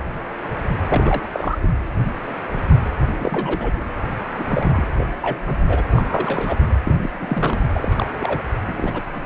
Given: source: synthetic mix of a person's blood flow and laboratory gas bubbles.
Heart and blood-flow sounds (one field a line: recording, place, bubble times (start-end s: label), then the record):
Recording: Doppler ultrasound of blood flow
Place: precordium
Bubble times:
0.89-1.58 s: bubbles
1.61-1.68 s: bubbles
3.11-3.71 s: bubbles
4.12-4.16 s: bubbles
4.38-4.43 s: bubbles
4.46-4.85 s: bubbles
4.98-5.04 s: bubbles
5.22-5.43 s: bubbles
5.46-5.57 s: bubbles
5.68-5.82 s: bubbles
5.96-6.05 s: bubbles
6.09-6.58 s: bubbles
6.84-7.10 s: bubbles
7.21-7.62 s: bubbles
7.75-8.06 s: bubbles
8.20-8.38 s: bubbles
8.65-9.01 s: bubbles
9.14-9.21 s: bubbles
From the record:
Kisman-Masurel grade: 232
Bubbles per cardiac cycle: several, 3 to 8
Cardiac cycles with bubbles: 50 to 99%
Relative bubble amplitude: moderate (0.250 to 0.450)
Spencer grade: 3 (all of the cardiac periods contain showers or single bubble signals, but not dominating or overriding the cardiac motion signals)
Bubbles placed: anywhere in the cardiac cycle